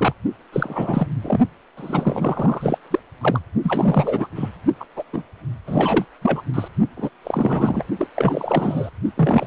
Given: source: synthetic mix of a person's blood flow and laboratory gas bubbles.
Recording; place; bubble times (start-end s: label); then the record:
Doppler ultrasound of blood flow; precordium
0.00-0.14 s: bubbles
0.52-1.07 s: bubbles
1.24-1.39 s: bubbles
1.77-2.78 s: bubbles
2.90-3.00 s: bubbles
3.21-3.40 s: bubbles
3.62-4.28 s: bubbles
4.36-4.49 s: bubbles
4.79-4.84 s: bubbles
4.96-5.04 s: bubbles
5.13-5.22 s: bubbles
5.67-6.05 s: bubbles
6.21-6.42 s: bubbles
6.54-6.68 s: bubbles
6.96-7.09 s: bubbles
7.24-7.84 s: bubbles
7.98-8.08 s: bubbles
8.14-8.90 s: bubbles
9.17-9.47 s: bubbles
From the record:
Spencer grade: 3 (all of the cardiac periods contain showers or single bubble signals, but not dominating or overriding the cardiac motion signals); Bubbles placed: only in the low amplitude regions of the cardiac cycle